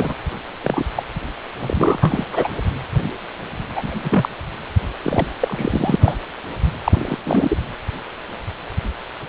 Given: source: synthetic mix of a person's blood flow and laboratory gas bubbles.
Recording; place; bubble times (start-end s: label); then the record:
Doppler ultrasound of blood flow; precordium
0.00-0.13 s: bubbles
0.64-0.83 s: bubbles
0.96-1.03 s: bubbles
1.60-2.25 s: bubbles
2.32-2.48 s: bubbles
3.75-3.99 s: bubbles
4.02-4.29 s: bubbles
5.03-5.27 s: bubbles
5.40-6.16 s: bubbles
6.84-7.16 s: bubbles
7.25-7.58 s: bubbles
From the record:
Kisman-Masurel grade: 232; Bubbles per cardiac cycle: several, 3 to 8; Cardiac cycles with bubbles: 50 to 99%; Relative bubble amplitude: moderate (0.250 to 0.450); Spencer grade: 3 (all of the cardiac periods contain showers or single bubble signals, but not dominating or overriding the cardiac motion signals); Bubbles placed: anywhere in the cardiac cycle